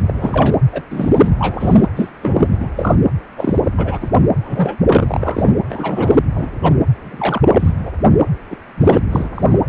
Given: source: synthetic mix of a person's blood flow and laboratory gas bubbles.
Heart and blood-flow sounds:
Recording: Doppler ultrasound of blood flow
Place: precordium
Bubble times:
0.07-0.57 s: bubbles
0.72-0.83 s: bubbles
0.90-1.31 s: bubbles
1.39-1.88 s: bubbles
1.96-2.09 s: bubbles
2.21-2.48 s: bubbles
2.52-2.69 s: bubbles
2.76-2.97 s: bubbles
3.37-3.57 s: bubbles
3.77-3.98 s: bubbles
4.01-4.11 s: bubbles
4.43-4.77 s: bubbles
4.88-5.54 s: bubbles
5.69-6.16 s: bubbles
6.36-6.51 s: bubbles
6.62-6.74 s: bubbles
7.04-7.72 s: bubbles
7.78-7.92 s: bubbles
8.50-8.58 s: bubbles
8.78-9.00 s: bubbles
9.09-9.29 s: bubbles
9.35-9.59 s: bubbles
From the record:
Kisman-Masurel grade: 243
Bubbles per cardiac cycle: several, 3 to 8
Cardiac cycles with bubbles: 100%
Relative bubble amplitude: loud (0.450 to 0.775)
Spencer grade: 3 (all of the cardiac periods contain showers or single bubble signals, but not dominating or overriding the cardiac motion signals)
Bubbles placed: anywhere in the cardiac cycle

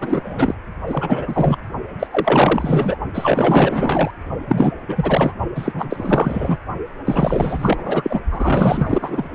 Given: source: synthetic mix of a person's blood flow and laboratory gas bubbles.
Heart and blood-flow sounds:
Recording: Doppler ultrasound of blood flow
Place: precordium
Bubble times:
0.00-0.54 s: bubbles
0.86-1.57 s: bubbles
1.99-2.07 s: bubbles
2.11-2.98 s: bubbles
3.13-4.11 s: bubbles
4.47-4.75 s: bubbles
4.88-5.33 s: bubbles
5.55-6.57 s: bubbles
7.04-8.21 s: bubbles
8.30-9.29 s: bubbles
From the record:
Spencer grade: 4 (maximum detectable bubble signal sounding continuously throughout systole and diastole of every cardiac period, and overriding the amplitude of the normal cardiac signals)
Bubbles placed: only in the low amplitude regions of the cardiac cycle

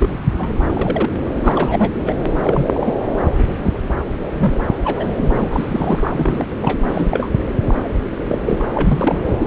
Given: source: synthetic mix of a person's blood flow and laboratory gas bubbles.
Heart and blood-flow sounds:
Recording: Doppler ultrasound of blood flow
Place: subclavian vein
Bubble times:
0.00-0.17 s: bubbles
0.38-0.52 s: bubbles
0.70-1.10 s: bubbles
1.43-1.92 s: bubbles
2.04-2.15 s: bubbles
2.43-2.94 s: bubbles
3.05-3.19 s: bubbles
3.38-3.44 s: bubbles
3.55-3.79 s: bubbles
4.31-4.64 s: bubbles
4.84-6.46 s: bubbles
6.51-6.56 s: bubbles
6.62-6.79 s: bubbles
6.86-7.27 s: bubbles
7.67-7.75 s: bubbles
8.29-8.38 s: bubbles
8.46-8.63 s: bubbles
8.74-9.23 s: bubbles
9.28-9.47 s: bubbles
From the record:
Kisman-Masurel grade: 242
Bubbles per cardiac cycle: several, 3 to 8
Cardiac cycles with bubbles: 100%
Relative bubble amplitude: moderate (0.250 to 0.450)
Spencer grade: 3 (all of the cardiac periods contain showers or single bubble signals, but not dominating or overriding the cardiac motion signals)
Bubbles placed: anywhere in the cardiac cycle

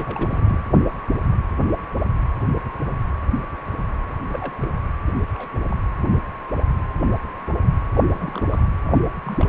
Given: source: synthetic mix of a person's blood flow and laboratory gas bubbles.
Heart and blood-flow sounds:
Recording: Doppler ultrasound of blood flow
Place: precordium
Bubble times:
0.00-0.62 s: bubbles
4.29-4.54 s: bubbles
4.62-4.71 s: bubbles
5.34-5.48 s: bubbles
5.56-5.66 s: bubbles
5.69-5.75 s: bubbles
7.93-8.01 s: bubbles
8.12-8.47 s: bubbles
8.50-8.62 s: bubbles
8.86-8.99 s: bubbles
9.23-9.49 s: bubbles
From the record:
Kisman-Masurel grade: 221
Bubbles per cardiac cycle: several, 3 to 8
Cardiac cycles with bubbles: 10 to 50%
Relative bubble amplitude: barely perceptible (0.100 to 0.250)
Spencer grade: 2 (many but less than half of the cardiac periods contain bubble signals, singularly or in groups)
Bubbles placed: anywhere in the cardiac cycle

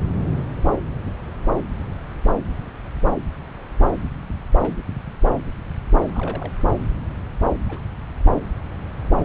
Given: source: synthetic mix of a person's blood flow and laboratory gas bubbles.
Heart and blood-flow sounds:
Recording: Doppler ultrasound of blood flow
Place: subclavian vein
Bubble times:
4.51-4.57 s: bubbles
4.60-4.76 s: bubbles
6.13-6.52 s: bubbles
7.66-7.80 s: bubbles
From the record:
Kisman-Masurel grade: 121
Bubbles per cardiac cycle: 1 to 2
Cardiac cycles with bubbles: 10 to 50%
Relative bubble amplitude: barely perceptible (0.100 to 0.250)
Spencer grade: 2 (many but less than half of the cardiac periods contain bubble signals, singularly or in groups)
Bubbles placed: anywhere in the cardiac cycle

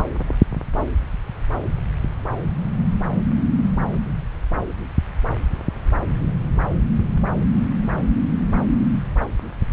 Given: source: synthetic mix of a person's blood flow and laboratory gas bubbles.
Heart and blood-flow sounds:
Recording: Doppler ultrasound of blood flow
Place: subclavian vein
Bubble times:
no bubbles
From the record:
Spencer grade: 0 (complete lack of bubble signals)

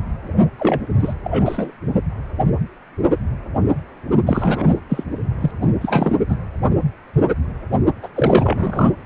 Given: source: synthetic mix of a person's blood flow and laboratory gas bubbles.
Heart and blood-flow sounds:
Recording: Doppler ultrasound of blood flow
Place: precordium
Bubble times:
0.57-0.89 s: bubbles
1.00-1.14 s: bubbles
1.24-1.73 s: bubbles
4.26-4.80 s: bubbles
4.88-5.04 s: bubbles
5.41-5.51 s: bubbles
5.61-5.69 s: bubbles
5.80-6.16 s: bubbles
6.29-6.37 s: bubbles
8.02-8.09 s: bubbles
8.15-8.93 s: bubbles
From the record:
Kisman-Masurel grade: 333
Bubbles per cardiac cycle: rolling drumbeat, 9 or more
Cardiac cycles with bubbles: 50 to 99%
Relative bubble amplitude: loud (0.450 to 0.775)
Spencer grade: 3 (all of the cardiac periods contain showers or single bubble signals, but not dominating or overriding the cardiac motion signals)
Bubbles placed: only in the low amplitude regions of the cardiac cycle

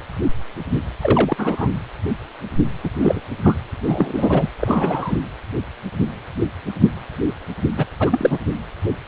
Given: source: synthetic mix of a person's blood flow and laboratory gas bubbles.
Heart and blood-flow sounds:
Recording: Doppler ultrasound of blood flow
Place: precordium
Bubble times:
1.01-1.68 s: bubbles
2.83-2.90 s: bubbles
3.00-3.21 s: bubbles
3.44-3.56 s: bubbles
3.83-4.46 s: bubbles
4.59-5.18 s: bubbles
7.77-7.86 s: bubbles
7.99-8.38 s: bubbles
From the record:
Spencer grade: 2 (many but less than half of the cardiac periods contain bubble signals, singularly or in groups)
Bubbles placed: anywhere in the cardiac cycle

